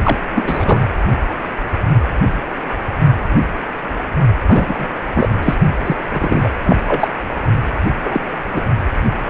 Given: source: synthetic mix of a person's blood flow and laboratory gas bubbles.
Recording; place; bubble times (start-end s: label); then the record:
Doppler ultrasound of blood flow; precordium
0.03-0.17 s: bubbles
0.35-0.84 s: bubbles
4.46-4.87 s: bubbles
5.14-5.29 s: bubbles
5.42-5.54 s: bubbles
5.84-5.97 s: bubbles
6.12-6.50 s: bubbles
6.63-6.76 s: bubbles
6.87-7.08 s: bubbles
8.04-8.20 s: bubbles
8.50-8.63 s: bubbles
From the record:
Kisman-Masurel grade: 223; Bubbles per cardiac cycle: several, 3 to 8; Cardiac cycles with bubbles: 10 to 50%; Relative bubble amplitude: loud (0.450 to 0.775); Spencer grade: 2 (many but less than half of the cardiac periods contain bubble signals, singularly or in groups); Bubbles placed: only in the low amplitude regions of the cardiac cycle